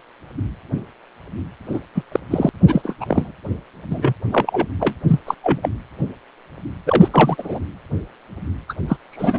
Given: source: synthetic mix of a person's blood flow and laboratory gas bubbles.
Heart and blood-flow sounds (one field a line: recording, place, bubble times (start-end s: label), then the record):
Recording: Doppler ultrasound of blood flow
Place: precordium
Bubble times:
1.72-1.81 s: bubbles
1.95-2.02 s: bubbles
2.11-2.19 s: bubbles
2.30-2.49 s: bubbles
2.66-2.95 s: bubbles
3.00-3.32 s: bubbles
3.90-4.13 s: bubbles
4.31-4.67 s: bubbles
4.79-4.95 s: bubbles
5.07-5.19 s: bubbles
5.26-5.34 s: bubbles
5.43-5.68 s: bubbles
6.87-7.08 s: bubbles
7.11-7.60 s: bubbles
8.69-8.74 s: bubbles
8.88-8.96 s: bubbles
9.11-9.39 s: bubbles
From the record:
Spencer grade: 3 (all of the cardiac periods contain showers or single bubble signals, but not dominating or overriding the cardiac motion signals)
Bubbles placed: anywhere in the cardiac cycle